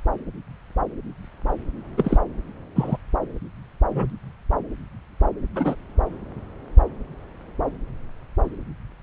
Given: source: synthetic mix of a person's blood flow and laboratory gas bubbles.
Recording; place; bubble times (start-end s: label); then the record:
Doppler ultrasound of blood flow; subclavian vein
1.97-2.17 s: bubbles
2.75-2.97 s: bubbles
3.90-4.10 s: bubbles
5.56-5.75 s: bubbles
From the record:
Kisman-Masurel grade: 122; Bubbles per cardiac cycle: 1 to 2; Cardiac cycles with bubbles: 10 to 50%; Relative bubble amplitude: moderate (0.250 to 0.450); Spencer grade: 2 (many but less than half of the cardiac periods contain bubble signals, singularly or in groups); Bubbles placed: anywhere in the cardiac cycle